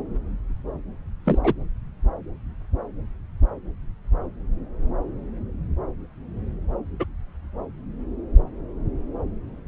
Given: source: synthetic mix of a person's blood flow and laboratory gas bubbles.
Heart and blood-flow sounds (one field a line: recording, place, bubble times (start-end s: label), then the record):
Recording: Doppler ultrasound of blood flow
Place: subclavian vein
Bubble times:
1.25-1.38 s: bubbles
1.44-1.53 s: bubbles
7.00-7.05 s: bubbles
From the record:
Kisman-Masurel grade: 112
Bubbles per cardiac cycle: 1 to 2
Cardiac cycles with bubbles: 1 to 10%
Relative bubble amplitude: moderate (0.250 to 0.450)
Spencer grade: 1 (occasional bubble signal discernible with the cardiac motion signal, with majority of cardiac periods free of bubbles)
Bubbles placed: anywhere in the cardiac cycle